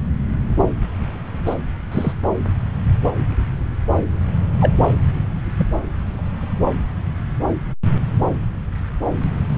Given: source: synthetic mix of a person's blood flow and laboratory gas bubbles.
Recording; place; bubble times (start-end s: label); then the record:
Doppler ultrasound of blood flow; subclavian vein
1.46-1.55 s: bubbles
1.92-2.12 s: bubbles
4.61-4.75 s: bubbles
5.57-5.67 s: bubbles
From the record:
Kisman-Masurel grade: 123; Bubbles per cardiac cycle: 1 to 2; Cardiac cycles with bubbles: 10 to 50%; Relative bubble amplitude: loud (0.450 to 0.775); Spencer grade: 2 (many but less than half of the cardiac periods contain bubble signals, singularly or in groups); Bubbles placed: anywhere in the cardiac cycle